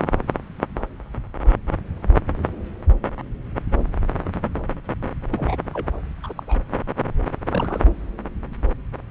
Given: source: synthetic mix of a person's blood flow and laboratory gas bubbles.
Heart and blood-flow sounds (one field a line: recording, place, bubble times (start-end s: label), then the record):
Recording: Doppler ultrasound of blood flow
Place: subclavian vein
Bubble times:
0.00-0.08 s: bubbles
5.32-5.58 s: bubbles
5.73-5.87 s: bubbles
6.23-6.33 s: bubbles
6.36-6.43 s: bubbles
6.47-6.58 s: bubbles
7.47-7.85 s: bubbles
From the record:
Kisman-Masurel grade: 221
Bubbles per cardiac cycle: several, 3 to 8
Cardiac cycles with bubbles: 10 to 50%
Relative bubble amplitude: barely perceptible (0.100 to 0.250)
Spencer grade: 2 (many but less than half of the cardiac periods contain bubble signals, singularly or in groups)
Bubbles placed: anywhere in the cardiac cycle